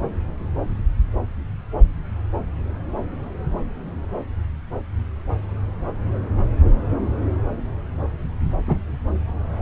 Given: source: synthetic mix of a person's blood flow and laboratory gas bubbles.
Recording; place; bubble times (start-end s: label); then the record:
Doppler ultrasound of blood flow; subclavian vein
8.67-8.78 s: bubbles
From the record:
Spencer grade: 1 (occasional bubble signal discernible with the cardiac motion signal, with majority of cardiac periods free of bubbles); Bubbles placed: anywhere in the cardiac cycle